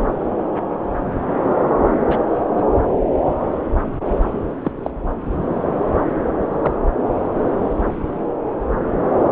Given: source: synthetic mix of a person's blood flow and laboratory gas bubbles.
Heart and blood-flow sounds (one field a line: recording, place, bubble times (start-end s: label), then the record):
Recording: Doppler ultrasound of blood flow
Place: subclavian vein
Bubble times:
2.09-2.17 s: bubbles
2.57-2.63 s: bubbles
4.64-4.71 s: bubbles
4.83-4.91 s: bubbles
6.42-6.78 s: bubbles
From the record:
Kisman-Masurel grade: 122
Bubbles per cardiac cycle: 1 to 2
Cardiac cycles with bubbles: 10 to 50%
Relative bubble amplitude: moderate (0.250 to 0.450)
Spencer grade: 2 (many but less than half of the cardiac periods contain bubble signals, singularly or in groups)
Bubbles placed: anywhere in the cardiac cycle